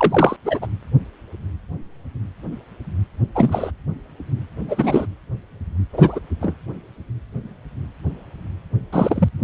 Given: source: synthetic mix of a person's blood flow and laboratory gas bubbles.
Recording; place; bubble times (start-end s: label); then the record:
Doppler ultrasound of blood flow; precordium
0.00-0.36 s: bubbles
0.45-0.59 s: bubbles
0.61-0.67 s: bubbles
3.35-3.71 s: bubbles
4.68-5.06 s: bubbles
5.93-6.20 s: bubbles
6.41-6.55 s: bubbles
8.92-9.29 s: bubbles
From the record:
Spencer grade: 2 (many but less than half of the cardiac periods contain bubble signals, singularly or in groups); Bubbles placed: anywhere in the cardiac cycle